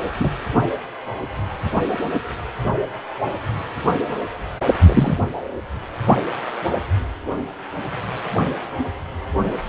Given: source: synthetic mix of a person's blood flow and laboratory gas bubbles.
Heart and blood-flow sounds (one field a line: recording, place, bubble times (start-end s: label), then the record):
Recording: Doppler ultrasound of blood flow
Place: precordium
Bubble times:
0.20-0.30 s: bubbles
0.55-0.60 s: bubbles
4.86-5.14 s: bubbles
From the record:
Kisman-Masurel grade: 113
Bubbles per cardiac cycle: 1 to 2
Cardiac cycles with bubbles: 1 to 10%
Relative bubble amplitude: loud (0.450 to 0.775)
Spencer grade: 1 (occasional bubble signal discernible with the cardiac motion signal, with majority of cardiac periods free of bubbles)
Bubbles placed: anywhere in the cardiac cycle